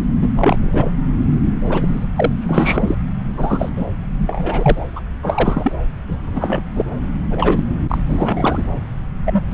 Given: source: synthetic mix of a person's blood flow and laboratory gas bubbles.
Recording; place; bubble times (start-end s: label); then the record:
Doppler ultrasound of blood flow; subclavian vein
0.21-0.32 s: bubbles
0.36-0.91 s: bubbles
1.65-2.06 s: bubbles
2.16-2.95 s: bubbles
3.37-3.70 s: bubbles
3.76-3.85 s: bubbles
4.18-4.86 s: bubbles
4.96-5.00 s: bubbles
5.22-5.72 s: bubbles
6.08-6.18 s: bubbles
6.33-6.62 s: bubbles
6.75-6.85 s: bubbles
7.30-7.64 s: bubbles
7.89-7.98 s: bubbles
8.08-8.63 s: bubbles
9.25-9.41 s: bubbles
9.50-9.54 s: bubbles
From the record:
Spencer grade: 3 (all of the cardiac periods contain showers or single bubble signals, but not dominating or overriding the cardiac motion signals); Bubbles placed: anywhere in the cardiac cycle